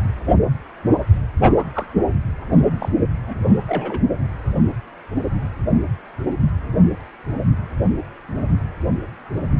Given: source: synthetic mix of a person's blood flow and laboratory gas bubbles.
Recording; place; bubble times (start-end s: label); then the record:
Doppler ultrasound of blood flow; precordium
1.45-1.64 s: bubbles
1.74-1.86 s: bubbles
2.79-2.89 s: bubbles
3.14-3.40 s: bubbles
3.67-4.02 s: bubbles
From the record:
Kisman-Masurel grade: 122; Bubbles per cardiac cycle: 1 to 2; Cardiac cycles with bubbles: 10 to 50%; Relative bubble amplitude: moderate (0.250 to 0.450); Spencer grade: 2 (many but less than half of the cardiac periods contain bubble signals, singularly or in groups); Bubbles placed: only in the low amplitude regions of the cardiac cycle